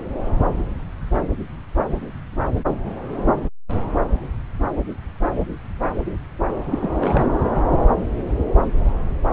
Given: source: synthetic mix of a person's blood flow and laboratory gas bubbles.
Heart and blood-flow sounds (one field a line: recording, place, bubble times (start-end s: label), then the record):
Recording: Doppler ultrasound of blood flow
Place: subclavian vein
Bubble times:
6.70-6.90 s: bubbles
7.00-7.24 s: bubbles
From the record:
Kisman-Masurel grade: 212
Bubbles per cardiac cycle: several, 3 to 8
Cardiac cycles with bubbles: 1 to 10%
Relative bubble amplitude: moderate (0.250 to 0.450)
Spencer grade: 1 (occasional bubble signal discernible with the cardiac motion signal, with majority of cardiac periods free of bubbles)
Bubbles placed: anywhere in the cardiac cycle